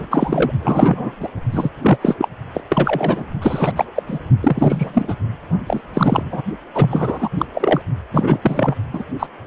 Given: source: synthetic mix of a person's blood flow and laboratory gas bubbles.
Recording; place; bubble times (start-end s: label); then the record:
Doppler ultrasound of blood flow; precordium
0.00-0.07 s: bubbles
0.11-0.52 s: bubbles
0.60-1.16 s: bubbles
1.20-1.28 s: bubbles
1.52-1.70 s: bubbles
1.82-1.99 s: bubbles
2.01-2.15 s: bubbles
2.18-2.28 s: bubbles
2.53-2.62 s: bubbles
2.69-3.23 s: bubbles
3.42-3.71 s: bubbles
3.75-3.85 s: bubbles
3.95-4.03 s: bubbles
4.07-4.20 s: bubbles
4.41-5.14 s: bubbles
5.67-5.80 s: bubbles
5.93-6.42 s: bubbles
6.75-7.29 s: bubbles
7.38-7.46 s: bubbles
7.54-7.81 s: bubbles
8.13-8.38 s: bubbles
8.41-8.75 s: bubbles
8.93-9.04 s: bubbles
9.19-9.27 s: bubbles
From the record:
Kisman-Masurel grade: 343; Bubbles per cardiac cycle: rolling drumbeat, 9 or more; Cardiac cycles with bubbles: 100%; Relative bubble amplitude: loud (0.450 to 0.775); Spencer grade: 3 (all of the cardiac periods contain showers or single bubble signals, but not dominating or overriding the cardiac motion signals); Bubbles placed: only in the low amplitude regions of the cardiac cycle